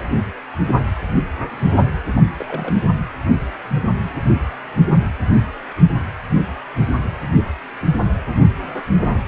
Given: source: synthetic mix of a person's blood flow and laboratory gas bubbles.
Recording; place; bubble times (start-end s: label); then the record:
Doppler ultrasound of blood flow; precordium
2.15-2.23 s: bubbles
2.37-2.88 s: bubbles
From the record:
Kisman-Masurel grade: 221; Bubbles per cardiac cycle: several, 3 to 8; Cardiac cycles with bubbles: 10 to 50%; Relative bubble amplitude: barely perceptible (0.100 to 0.250); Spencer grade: 2 (many but less than half of the cardiac periods contain bubble signals, singularly or in groups); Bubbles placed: anywhere in the cardiac cycle